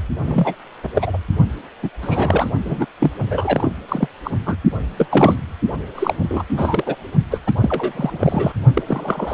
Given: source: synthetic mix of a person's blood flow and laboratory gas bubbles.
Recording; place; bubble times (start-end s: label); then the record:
Doppler ultrasound of blood flow; precordium
0.23-0.55 s: bubbles
0.82-0.89 s: bubbles
0.95-1.18 s: bubbles
1.83-1.90 s: bubbles
2.02-2.52 s: bubbles
2.65-2.87 s: bubbles
3.00-3.72 s: bubbles
3.88-4.08 s: bubbles
4.24-4.30 s: bubbles
4.46-4.56 s: bubbles
4.97-5.06 s: bubbles
5.10-5.37 s: bubbles
5.95-6.14 s: bubbles
6.22-6.44 s: bubbles
6.48-6.96 s: bubbles
7.30-7.39 s: bubbles
7.46-7.53 s: bubbles
7.61-8.52 s: bubbles
8.75-8.83 s: bubbles
8.87-9.34 s: bubbles
From the record:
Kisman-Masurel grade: 343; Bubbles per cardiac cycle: rolling drumbeat, 9 or more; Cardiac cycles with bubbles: 100%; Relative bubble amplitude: loud (0.450 to 0.775); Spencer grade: 3 (all of the cardiac periods contain showers or single bubble signals, but not dominating or overriding the cardiac motion signals); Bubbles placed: only in the low amplitude regions of the cardiac cycle